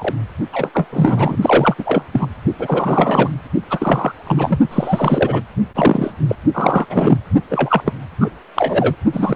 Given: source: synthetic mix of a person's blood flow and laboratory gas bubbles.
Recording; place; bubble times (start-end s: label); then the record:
Doppler ultrasound of blood flow; precordium
0.00-0.14 s: bubbles
0.52-0.70 s: bubbles
0.73-0.87 s: bubbles
0.92-1.36 s: bubbles
1.41-1.75 s: bubbles
1.78-2.04 s: bubbles
2.12-2.28 s: bubbles
2.58-3.29 s: bubbles
3.70-4.12 s: bubbles
4.27-4.59 s: bubbles
4.71-5.42 s: bubbles
5.75-6.13 s: bubbles
6.28-6.36 s: bubbles
6.54-6.86 s: bubbles
6.89-7.17 s: bubbles
7.50-7.93 s: bubbles
8.21-8.30 s: bubbles
8.55-8.96 s: bubbles
9.12-9.36 s: bubbles
From the record:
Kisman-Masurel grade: 343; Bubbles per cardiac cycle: rolling drumbeat, 9 or more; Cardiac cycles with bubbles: 100%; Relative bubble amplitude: loud (0.450 to 0.775); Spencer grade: 3 (all of the cardiac periods contain showers or single bubble signals, but not dominating or overriding the cardiac motion signals); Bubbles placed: only in the low amplitude regions of the cardiac cycle